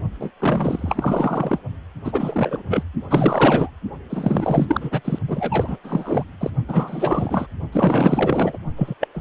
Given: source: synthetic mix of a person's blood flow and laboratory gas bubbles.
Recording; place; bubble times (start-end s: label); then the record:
Doppler ultrasound of blood flow; precordium
0.19-0.30 s: bubbles
0.39-1.61 s: bubbles
2.04-2.62 s: bubbles
2.67-2.83 s: bubbles
3.08-3.71 s: bubbles
4.09-5.01 s: bubbles
5.04-5.18 s: bubbles
5.27-5.76 s: bubbles
5.83-6.23 s: bubbles
6.40-6.50 s: bubbles
6.68-7.47 s: bubbles
7.72-8.58 s: bubbles
8.76-8.95 s: bubbles
9.00-9.08 s: bubbles
9.14-9.21 s: bubbles
From the record:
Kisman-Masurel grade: 444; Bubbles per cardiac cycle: continuous sound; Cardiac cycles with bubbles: 100%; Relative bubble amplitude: maximal (0.775 to 0.999); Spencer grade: 4 (maximum detectable bubble signal sounding continuously throughout systole and diastole of every cardiac period, and overriding the amplitude of the normal cardiac signals); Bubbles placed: only in the low amplitude regions of the cardiac cycle